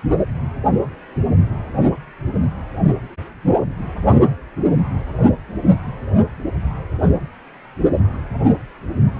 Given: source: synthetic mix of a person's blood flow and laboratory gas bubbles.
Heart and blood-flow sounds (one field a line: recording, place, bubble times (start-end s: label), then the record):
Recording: Doppler ultrasound of blood flow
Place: precordium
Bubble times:
no bubbles
From the record:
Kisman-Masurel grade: 000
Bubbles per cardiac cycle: 0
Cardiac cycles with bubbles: 0%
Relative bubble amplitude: no bubbles discernible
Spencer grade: 0 (complete lack of bubble signals)